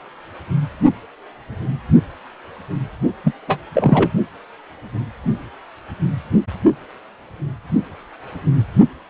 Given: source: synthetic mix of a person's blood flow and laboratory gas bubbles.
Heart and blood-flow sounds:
Doppler ultrasound of blood flow; precordium
3.24-3.33 s: bubbles
3.48-3.60 s: bubbles
3.74-4.11 s: bubbles
From the record:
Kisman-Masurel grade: 213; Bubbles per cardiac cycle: several, 3 to 8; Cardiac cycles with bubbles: 1 to 10%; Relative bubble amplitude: loud (0.450 to 0.775); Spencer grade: 1 (occasional bubble signal discernible with the cardiac motion signal, with majority of cardiac periods free of bubbles); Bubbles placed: only in the low amplitude regions of the cardiac cycle

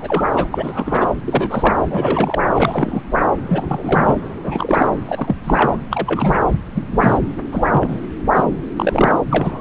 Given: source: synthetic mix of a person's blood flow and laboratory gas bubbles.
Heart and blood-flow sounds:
Doppler ultrasound of blood flow; subclavian vein
0.00-0.27 s: bubbles
0.35-0.47 s: bubbles
0.52-1.08 s: bubbles
1.26-1.74 s: bubbles
1.90-2.40 s: bubbles
2.54-3.02 s: bubbles
3.48-4.17 s: bubbles
4.44-4.87 s: bubbles
5.05-5.37 s: bubbles
5.45-5.76 s: bubbles
5.90-6.47 s: bubbles
6.75-7.18 s: bubbles
7.52-7.99 s: bubbles
8.35-8.45 s: bubbles
8.76-9.19 s: bubbles
9.27-9.61 s: bubbles
From the record:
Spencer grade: 3 (all of the cardiac periods contain showers or single bubble signals, but not dominating or overriding the cardiac motion signals); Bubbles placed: anywhere in the cardiac cycle

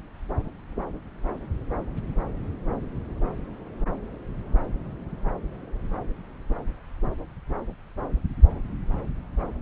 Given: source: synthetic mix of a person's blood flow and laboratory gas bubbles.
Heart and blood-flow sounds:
Doppler ultrasound of blood flow; subclavian vein
no bubbles
From the record:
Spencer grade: 0 (complete lack of bubble signals)

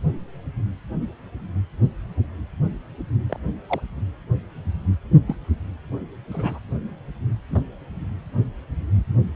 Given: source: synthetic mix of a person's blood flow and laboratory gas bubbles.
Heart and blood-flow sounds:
Doppler ultrasound of blood flow; precordium
3.29-3.40 s: bubbles
3.68-3.80 s: bubbles
5.27-5.36 s: bubbles
6.31-6.58 s: bubbles
7.50-7.62 s: bubbles
From the record:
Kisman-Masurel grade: 121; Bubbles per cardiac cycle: 1 to 2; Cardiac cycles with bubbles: 10 to 50%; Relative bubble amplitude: barely perceptible (0.100 to 0.250); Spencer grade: 2 (many but less than half of the cardiac periods contain bubble signals, singularly or in groups); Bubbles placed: anywhere in the cardiac cycle

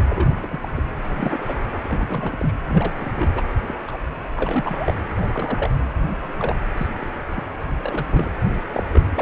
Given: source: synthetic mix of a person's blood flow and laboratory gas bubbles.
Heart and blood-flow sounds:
Doppler ultrasound of blood flow; precordium
0.09-0.68 s: bubbles
0.76-0.83 s: bubbles
1.05-1.80 s: bubbles
1.84-2.54 s: bubbles
2.69-2.93 s: bubbles
2.99-3.12 s: bubbles
3.16-3.29 s: bubbles
3.34-3.43 s: bubbles
3.68-3.74 s: bubbles
3.88-3.98 s: bubbles
4.35-5.02 s: bubbles
5.15-5.77 s: bubbles
6.38-6.57 s: bubbles
6.77-6.88 s: bubbles
7.00-7.08 s: bubbles
7.35-7.48 s: bubbles
7.79-8.29 s: bubbles
8.72-8.83 s: bubbles
8.92-9.01 s: bubbles
9.14-9.22 s: bubbles
From the record:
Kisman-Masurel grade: 242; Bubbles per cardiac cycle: several, 3 to 8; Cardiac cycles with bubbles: 100%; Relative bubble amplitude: moderate (0.250 to 0.450); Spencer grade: 3 (all of the cardiac periods contain showers or single bubble signals, but not dominating or overriding the cardiac motion signals); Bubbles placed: anywhere in the cardiac cycle

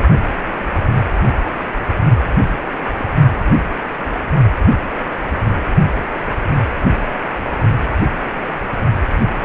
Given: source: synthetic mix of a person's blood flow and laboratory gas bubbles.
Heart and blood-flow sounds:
Doppler ultrasound of blood flow; precordium
2.97-3.05 s: bubbles
From the record:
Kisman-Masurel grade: 121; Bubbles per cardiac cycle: 1 to 2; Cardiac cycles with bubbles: 10 to 50%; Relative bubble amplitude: barely perceptible (0.100 to 0.250); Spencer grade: 2 (many but less than half of the cardiac periods contain bubble signals, singularly or in groups); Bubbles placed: only in the low amplitude regions of the cardiac cycle

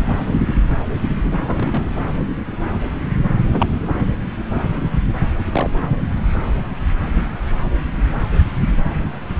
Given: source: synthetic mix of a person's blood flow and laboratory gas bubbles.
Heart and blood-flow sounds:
Doppler ultrasound of blood flow; subclavian vein
1.46-1.83 s: bubbles
3.52-3.67 s: bubbles
5.52-5.70 s: bubbles
From the record:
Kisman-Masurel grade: 122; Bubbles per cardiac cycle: 1 to 2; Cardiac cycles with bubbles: 10 to 50%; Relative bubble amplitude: moderate (0.250 to 0.450); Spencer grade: 2 (many but less than half of the cardiac periods contain bubble signals, singularly or in groups); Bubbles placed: anywhere in the cardiac cycle

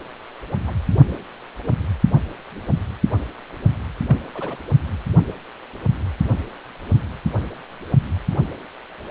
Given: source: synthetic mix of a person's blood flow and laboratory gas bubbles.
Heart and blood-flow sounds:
Doppler ultrasound of blood flow; precordium
0.67-0.73 s: bubbles
4.08-4.16 s: bubbles
4.35-4.57 s: bubbles
From the record:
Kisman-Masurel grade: 121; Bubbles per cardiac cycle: 1 to 2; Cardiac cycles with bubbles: 10 to 50%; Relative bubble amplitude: barely perceptible (0.100 to 0.250); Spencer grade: 2 (many but less than half of the cardiac periods contain bubble signals, singularly or in groups); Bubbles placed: only in the low amplitude regions of the cardiac cycle

